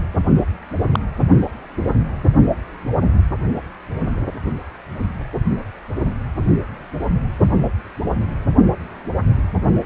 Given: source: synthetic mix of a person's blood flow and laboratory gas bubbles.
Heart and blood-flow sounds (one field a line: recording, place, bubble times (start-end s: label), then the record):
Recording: Doppler ultrasound of blood flow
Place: precordium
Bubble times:
0.93-0.99 s: bubbles
From the record:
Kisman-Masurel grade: 112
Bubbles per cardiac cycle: 1 to 2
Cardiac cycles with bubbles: 1 to 10%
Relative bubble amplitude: moderate (0.250 to 0.450)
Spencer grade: 1 (occasional bubble signal discernible with the cardiac motion signal, with majority of cardiac periods free of bubbles)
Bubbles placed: anywhere in the cardiac cycle